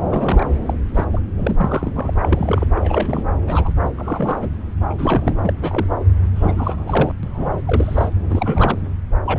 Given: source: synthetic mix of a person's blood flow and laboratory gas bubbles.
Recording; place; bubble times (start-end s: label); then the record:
Doppler ultrasound of blood flow; subclavian vein
0.08-0.46 s: bubbles
0.66-0.73 s: bubbles
0.94-1.04 s: bubbles
1.12-1.21 s: bubbles
1.37-1.91 s: bubbles
1.95-2.14 s: bubbles
2.22-2.65 s: bubbles
2.74-3.25 s: bubbles
3.46-3.72 s: bubbles
3.97-4.50 s: bubbles
4.89-4.94 s: bubbles
4.98-5.36 s: bubbles
5.42-5.53 s: bubbles
5.61-5.87 s: bubbles
6.35-7.13 s: bubbles
7.23-7.59 s: bubbles
7.65-8.09 s: bubbles
8.29-8.82 s: bubbles
9.25-9.39 s: bubbles
From the record:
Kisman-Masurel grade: 242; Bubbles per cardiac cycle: several, 3 to 8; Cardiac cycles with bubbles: 100%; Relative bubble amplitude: moderate (0.250 to 0.450); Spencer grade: 3 (all of the cardiac periods contain showers or single bubble signals, but not dominating or overriding the cardiac motion signals); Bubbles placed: anywhere in the cardiac cycle